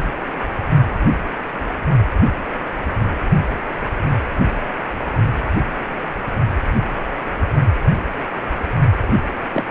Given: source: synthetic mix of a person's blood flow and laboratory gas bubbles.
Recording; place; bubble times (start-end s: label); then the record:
Doppler ultrasound of blood flow; precordium
9.03-9.33 s: bubbles
9.54-9.63 s: bubbles
From the record:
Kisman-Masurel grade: 212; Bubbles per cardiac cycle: several, 3 to 8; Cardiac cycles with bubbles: 1 to 10%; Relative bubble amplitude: moderate (0.250 to 0.450); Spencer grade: 1 (occasional bubble signal discernible with the cardiac motion signal, with majority of cardiac periods free of bubbles); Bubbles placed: anywhere in the cardiac cycle